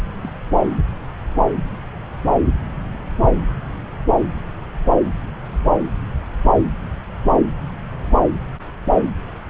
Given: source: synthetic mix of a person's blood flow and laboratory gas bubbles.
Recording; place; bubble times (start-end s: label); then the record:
Doppler ultrasound of blood flow; subclavian vein
0.21-0.32 s: bubbles
From the record:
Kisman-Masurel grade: 111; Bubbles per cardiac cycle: 1 to 2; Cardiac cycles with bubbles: 1 to 10%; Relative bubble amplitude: barely perceptible (0.100 to 0.250); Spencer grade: 1 (occasional bubble signal discernible with the cardiac motion signal, with majority of cardiac periods free of bubbles); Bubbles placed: anywhere in the cardiac cycle